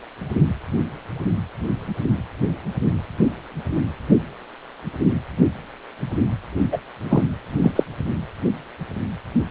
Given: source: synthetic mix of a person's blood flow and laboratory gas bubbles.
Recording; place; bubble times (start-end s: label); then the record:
Doppler ultrasound of blood flow; precordium
6.71-6.78 s: bubbles
7.03-7.23 s: bubbles
7.63-7.72 s: bubbles
7.75-7.83 s: bubbles
From the record:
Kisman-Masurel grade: 213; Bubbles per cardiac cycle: several, 3 to 8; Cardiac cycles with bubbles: 1 to 10%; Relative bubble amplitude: loud (0.450 to 0.775); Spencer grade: 1 (occasional bubble signal discernible with the cardiac motion signal, with majority of cardiac periods free of bubbles); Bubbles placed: anywhere in the cardiac cycle